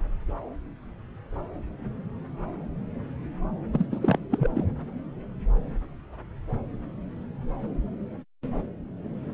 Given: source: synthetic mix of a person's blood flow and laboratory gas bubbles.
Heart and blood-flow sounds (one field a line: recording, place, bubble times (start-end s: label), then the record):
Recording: Doppler ultrasound of blood flow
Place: subclavian vein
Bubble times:
3.73-3.86 s: bubbles
3.92-4.18 s: bubbles
4.30-4.66 s: bubbles
From the record:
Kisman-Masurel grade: 222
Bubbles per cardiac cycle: several, 3 to 8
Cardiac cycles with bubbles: 10 to 50%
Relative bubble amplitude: moderate (0.250 to 0.450)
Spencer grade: 2 (many but less than half of the cardiac periods contain bubble signals, singularly or in groups)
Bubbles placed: anywhere in the cardiac cycle